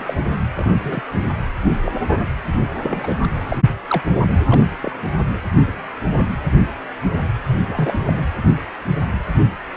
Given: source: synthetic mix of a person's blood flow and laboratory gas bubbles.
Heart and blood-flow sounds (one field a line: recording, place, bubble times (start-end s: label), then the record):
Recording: Doppler ultrasound of blood flow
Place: precordium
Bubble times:
0.00-0.15 s: bubbles
0.56-0.71 s: bubbles
0.82-1.01 s: bubbles
1.21-1.27 s: bubbles
1.85-1.92 s: bubbles
2.82-3.12 s: bubbles
3.23-3.27 s: bubbles
3.49-3.59 s: bubbles
3.88-4.02 s: bubbles
4.51-4.61 s: bubbles
4.83-4.92 s: bubbles
7.47-7.57 s: bubbles
7.66-8.00 s: bubbles
8.06-8.26 s: bubbles
From the record:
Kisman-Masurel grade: 232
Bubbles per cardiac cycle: several, 3 to 8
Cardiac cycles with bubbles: 50 to 99%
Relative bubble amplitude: moderate (0.250 to 0.450)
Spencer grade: 3 (all of the cardiac periods contain showers or single bubble signals, but not dominating or overriding the cardiac motion signals)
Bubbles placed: anywhere in the cardiac cycle